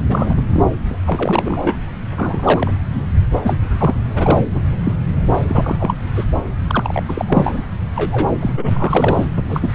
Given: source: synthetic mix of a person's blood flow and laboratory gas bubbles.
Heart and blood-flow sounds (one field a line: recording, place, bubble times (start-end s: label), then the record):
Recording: Doppler ultrasound of blood flow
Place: subclavian vein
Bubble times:
0.08-0.34 s: bubbles
0.37-0.42 s: bubbles
0.49-0.65 s: bubbles
0.90-0.97 s: bubbles
1.06-1.77 s: bubbles
2.16-2.71 s: bubbles
2.92-3.05 s: bubbles
3.43-3.56 s: bubbles
3.78-3.95 s: bubbles
4.08-4.44 s: bubbles
4.52-4.60 s: bubbles
4.83-4.94 s: bubbles
5.49-5.76 s: bubbles
5.79-5.94 s: bubbles
6.15-6.25 s: bubbles
6.68-7.03 s: bubbles
7.08-7.64 s: bubbles
7.96-8.29 s: bubbles
8.41-8.54 s: bubbles
8.56-8.71 s: bubbles
8.74-9.25 s: bubbles
9.36-9.43 s: bubbles
9.48-9.75 s: bubbles
From the record:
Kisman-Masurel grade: 242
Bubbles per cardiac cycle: several, 3 to 8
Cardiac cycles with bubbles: 100%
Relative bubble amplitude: moderate (0.250 to 0.450)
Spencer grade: 3 (all of the cardiac periods contain showers or single bubble signals, but not dominating or overriding the cardiac motion signals)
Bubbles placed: anywhere in the cardiac cycle